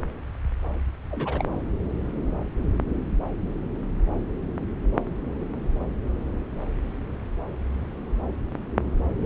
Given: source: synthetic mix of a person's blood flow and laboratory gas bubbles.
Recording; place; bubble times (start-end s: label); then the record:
Doppler ultrasound of blood flow; subclavian vein
1.08-1.48 s: bubbles
From the record:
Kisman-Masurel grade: 212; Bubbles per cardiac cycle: several, 3 to 8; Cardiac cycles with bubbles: 1 to 10%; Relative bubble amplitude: moderate (0.250 to 0.450); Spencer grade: 1 (occasional bubble signal discernible with the cardiac motion signal, with majority of cardiac periods free of bubbles); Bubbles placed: anywhere in the cardiac cycle